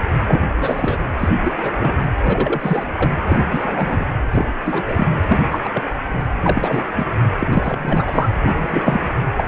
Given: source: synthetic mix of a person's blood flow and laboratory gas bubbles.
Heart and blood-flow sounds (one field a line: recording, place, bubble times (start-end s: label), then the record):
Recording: Doppler ultrasound of blood flow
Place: precordium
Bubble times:
0.00-0.02 s: bubbles
0.27-0.41 s: bubbles
0.55-1.06 s: bubbles
1.18-1.29 s: bubbles
1.44-1.54 s: bubbles
1.62-1.71 s: bubbles
1.78-1.98 s: bubbles
2.23-2.84 s: bubbles
2.96-3.11 s: bubbles
3.27-4.06 s: bubbles
4.25-4.28 s: bubbles
4.32-4.45 s: bubbles
4.66-5.07 s: bubbles
5.29-5.42 s: bubbles
5.52-5.60 s: bubbles
5.64-5.70 s: bubbles
5.74-5.83 s: bubbles
6.36-6.38 s: bubbles
6.43-7.05 s: bubbles
7.38-7.48 s: bubbles
7.52-8.29 s: bubbles
8.38-9.05 s: bubbles
9.37-9.47 s: bubbles
From the record:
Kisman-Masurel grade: 243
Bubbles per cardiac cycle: several, 3 to 8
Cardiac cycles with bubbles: 100%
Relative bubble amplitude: loud (0.450 to 0.775)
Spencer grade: 3 (all of the cardiac periods contain showers or single bubble signals, but not dominating or overriding the cardiac motion signals)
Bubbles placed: anywhere in the cardiac cycle